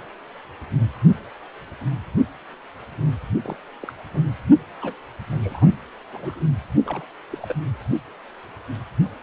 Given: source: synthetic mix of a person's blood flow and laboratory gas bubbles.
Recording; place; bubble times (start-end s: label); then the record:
Doppler ultrasound of blood flow; precordium
3.43-3.56 s: bubbles
3.83-3.92 s: bubbles
4.13-4.29 s: bubbles
4.80-4.94 s: bubbles
5.28-5.70 s: bubbles
6.12-6.42 s: bubbles
6.86-7.04 s: bubbles
7.31-7.55 s: bubbles
From the record:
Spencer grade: 2 (many but less than half of the cardiac periods contain bubble signals, singularly or in groups); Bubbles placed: only in the low amplitude regions of the cardiac cycle